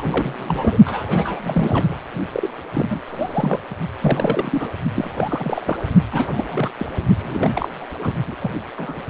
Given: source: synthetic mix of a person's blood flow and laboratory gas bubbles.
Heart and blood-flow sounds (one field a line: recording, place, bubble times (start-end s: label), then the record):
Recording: Doppler ultrasound of blood flow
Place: precordium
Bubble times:
0.00-0.78 s: bubbles
0.85-1.99 s: bubbles
2.33-2.47 s: bubbles
2.73-3.00 s: bubbles
3.07-3.59 s: bubbles
4.00-4.69 s: bubbles
4.95-5.77 s: bubbles
6.12-6.45 s: bubbles
6.51-6.70 s: bubbles
6.79-6.87 s: bubbles
7.20-7.69 s: bubbles
7.80-7.86 s: bubbles
8.00-8.13 s: bubbles
8.28-8.36 s: bubbles
8.41-8.50 s: bubbles
8.78-9.02 s: bubbles
From the record:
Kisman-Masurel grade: 342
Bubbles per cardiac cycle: rolling drumbeat, 9 or more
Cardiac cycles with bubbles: 100%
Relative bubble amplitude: moderate (0.250 to 0.450)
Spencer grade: 3 (all of the cardiac periods contain showers or single bubble signals, but not dominating or overriding the cardiac motion signals)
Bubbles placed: only in the low amplitude regions of the cardiac cycle